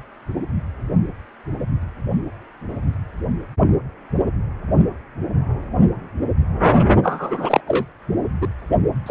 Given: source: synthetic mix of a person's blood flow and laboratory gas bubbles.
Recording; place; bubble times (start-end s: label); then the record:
Doppler ultrasound of blood flow; precordium
7.03-7.60 s: bubbles
7.67-7.85 s: bubbles
8.41-8.48 s: bubbles
9.06-9.11 s: bubbles
From the record:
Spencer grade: 2 (many but less than half of the cardiac periods contain bubble signals, singularly or in groups); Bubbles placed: only in the low amplitude regions of the cardiac cycle